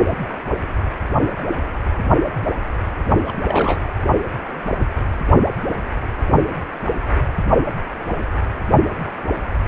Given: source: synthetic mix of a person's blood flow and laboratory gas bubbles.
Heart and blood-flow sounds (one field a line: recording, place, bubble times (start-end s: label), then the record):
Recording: Doppler ultrasound of blood flow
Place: precordium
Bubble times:
3.27-3.33 s: bubbles
3.48-3.88 s: bubbles
From the record:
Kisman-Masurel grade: 212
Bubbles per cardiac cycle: several, 3 to 8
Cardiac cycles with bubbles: 1 to 10%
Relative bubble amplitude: moderate (0.250 to 0.450)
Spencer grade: 1 (occasional bubble signal discernible with the cardiac motion signal, with majority of cardiac periods free of bubbles)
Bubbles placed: only in the low amplitude regions of the cardiac cycle